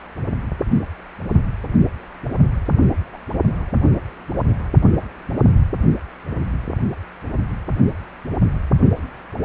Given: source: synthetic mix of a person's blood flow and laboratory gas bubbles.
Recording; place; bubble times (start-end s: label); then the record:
Doppler ultrasound of blood flow; precordium
3.12-3.18 s: bubbles
From the record:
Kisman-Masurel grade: 121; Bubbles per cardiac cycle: 1 to 2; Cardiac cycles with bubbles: 10 to 50%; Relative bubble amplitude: barely perceptible (0.100 to 0.250); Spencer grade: 2 (many but less than half of the cardiac periods contain bubble signals, singularly or in groups); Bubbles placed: only in the low amplitude regions of the cardiac cycle